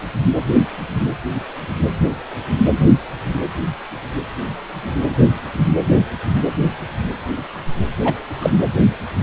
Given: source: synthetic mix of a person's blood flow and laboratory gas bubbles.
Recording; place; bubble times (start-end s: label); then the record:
Doppler ultrasound of blood flow; precordium
8.04-8.15 s: bubbles
8.40-8.50 s: bubbles
From the record:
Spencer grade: 1 (occasional bubble signal discernible with the cardiac motion signal, with majority of cardiac periods free of bubbles); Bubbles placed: anywhere in the cardiac cycle